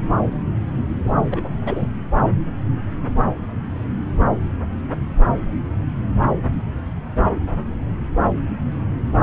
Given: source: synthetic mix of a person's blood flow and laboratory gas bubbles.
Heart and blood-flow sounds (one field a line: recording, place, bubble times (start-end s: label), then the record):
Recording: Doppler ultrasound of blood flow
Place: subclavian vein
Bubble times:
1.04-1.13 s: bubbles
1.31-1.49 s: bubbles
1.65-1.88 s: bubbles
From the record:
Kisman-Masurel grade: 222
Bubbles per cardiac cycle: several, 3 to 8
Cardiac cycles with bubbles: 10 to 50%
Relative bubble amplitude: moderate (0.250 to 0.450)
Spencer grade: 2 (many but less than half of the cardiac periods contain bubble signals, singularly or in groups)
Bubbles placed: anywhere in the cardiac cycle